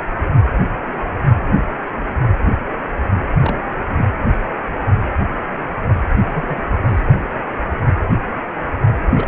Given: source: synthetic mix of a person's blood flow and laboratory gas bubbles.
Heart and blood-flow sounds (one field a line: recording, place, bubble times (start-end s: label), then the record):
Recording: Doppler ultrasound of blood flow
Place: precordium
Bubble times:
3.40-3.56 s: bubbles
3.89-4.05 s: bubbles
6.26-6.31 s: bubbles
6.35-6.62 s: bubbles
6.84-7.02 s: bubbles
9.15-9.28 s: bubbles
From the record:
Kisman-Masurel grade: 222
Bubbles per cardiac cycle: several, 3 to 8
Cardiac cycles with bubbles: 10 to 50%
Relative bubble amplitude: moderate (0.250 to 0.450)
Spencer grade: 2 (many but less than half of the cardiac periods contain bubble signals, singularly or in groups)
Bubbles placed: anywhere in the cardiac cycle